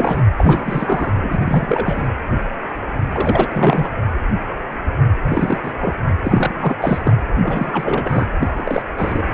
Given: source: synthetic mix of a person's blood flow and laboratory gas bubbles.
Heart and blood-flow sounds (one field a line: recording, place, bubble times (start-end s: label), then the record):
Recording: Doppler ultrasound of blood flow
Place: precordium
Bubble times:
0.00-0.22 s: bubbles
0.37-1.15 s: bubbles
1.23-2.08 s: bubbles
3.12-3.89 s: bubbles
5.28-5.72 s: bubbles
5.80-5.94 s: bubbles
6.24-6.75 s: bubbles
6.81-7.14 s: bubbles
7.42-8.28 s: bubbles
8.40-8.82 s: bubbles
8.98-9.27 s: bubbles
From the record:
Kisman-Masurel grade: 332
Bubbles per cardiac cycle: rolling drumbeat, 9 or more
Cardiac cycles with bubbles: 50 to 99%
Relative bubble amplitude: moderate (0.250 to 0.450)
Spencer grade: 3 (all of the cardiac periods contain showers or single bubble signals, but not dominating or overriding the cardiac motion signals)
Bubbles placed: anywhere in the cardiac cycle